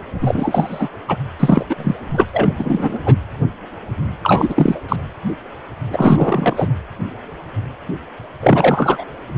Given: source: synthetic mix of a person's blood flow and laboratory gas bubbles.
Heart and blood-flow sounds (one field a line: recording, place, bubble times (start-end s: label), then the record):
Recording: Doppler ultrasound of blood flow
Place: precordium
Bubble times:
0.21-0.89 s: bubbles
1.08-1.17 s: bubbles
1.39-1.67 s: bubbles
1.69-1.94 s: bubbles
2.15-2.27 s: bubbles
2.32-2.54 s: bubbles
2.58-2.99 s: bubbles
3.05-3.16 s: bubbles
4.23-4.83 s: bubbles
4.88-4.96 s: bubbles
5.91-6.68 s: bubbles
8.40-9.06 s: bubbles
From the record:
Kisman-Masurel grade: 333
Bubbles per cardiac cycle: rolling drumbeat, 9 or more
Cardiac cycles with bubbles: 50 to 99%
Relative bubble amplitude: loud (0.450 to 0.775)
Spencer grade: 3 (all of the cardiac periods contain showers or single bubble signals, but not dominating or overriding the cardiac motion signals)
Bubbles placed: anywhere in the cardiac cycle